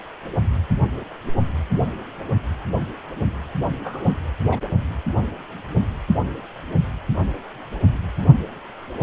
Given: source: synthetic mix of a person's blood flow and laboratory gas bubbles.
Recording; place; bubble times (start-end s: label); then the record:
Doppler ultrasound of blood flow; precordium
3.84-4.12 s: bubbles
4.50-4.60 s: bubbles
From the record:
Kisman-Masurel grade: 112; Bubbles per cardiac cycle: 1 to 2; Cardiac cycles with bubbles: 1 to 10%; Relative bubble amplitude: moderate (0.250 to 0.450); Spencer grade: 1 (occasional bubble signal discernible with the cardiac motion signal, with majority of cardiac periods free of bubbles); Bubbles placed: anywhere in the cardiac cycle